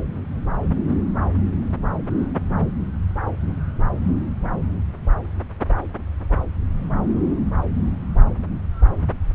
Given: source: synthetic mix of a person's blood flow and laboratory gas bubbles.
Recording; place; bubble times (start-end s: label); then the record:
Doppler ultrasound of blood flow; subclavian vein
no bubbles
From the record:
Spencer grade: 0 (complete lack of bubble signals)